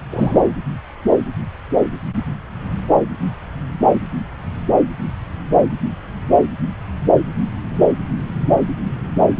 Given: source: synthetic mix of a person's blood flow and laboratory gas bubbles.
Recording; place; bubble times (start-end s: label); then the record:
Doppler ultrasound of blood flow; subclavian vein
0.10-0.41 s: bubbles
From the record:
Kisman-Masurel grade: 213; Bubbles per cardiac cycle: several, 3 to 8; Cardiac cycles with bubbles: 1 to 10%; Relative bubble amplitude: loud (0.450 to 0.775); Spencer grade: 1 (occasional bubble signal discernible with the cardiac motion signal, with majority of cardiac periods free of bubbles); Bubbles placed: anywhere in the cardiac cycle